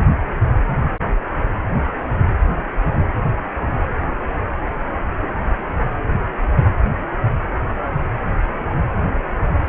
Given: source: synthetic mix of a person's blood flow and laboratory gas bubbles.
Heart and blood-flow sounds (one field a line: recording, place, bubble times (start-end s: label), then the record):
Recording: Doppler ultrasound of blood flow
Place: precordium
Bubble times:
no bubbles
From the record:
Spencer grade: 0 (complete lack of bubble signals)